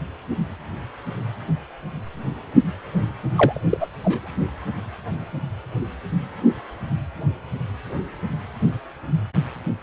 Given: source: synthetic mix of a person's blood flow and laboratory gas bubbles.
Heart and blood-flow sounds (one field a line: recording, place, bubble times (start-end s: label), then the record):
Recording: Doppler ultrasound of blood flow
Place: precordium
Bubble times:
3.34-3.60 s: bubbles
3.69-3.77 s: bubbles
3.80-3.88 s: bubbles
4.03-4.34 s: bubbles
From the record:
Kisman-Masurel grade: 212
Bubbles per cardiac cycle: several, 3 to 8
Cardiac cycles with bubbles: 1 to 10%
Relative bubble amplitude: moderate (0.250 to 0.450)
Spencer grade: 1 (occasional bubble signal discernible with the cardiac motion signal, with majority of cardiac periods free of bubbles)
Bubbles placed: anywhere in the cardiac cycle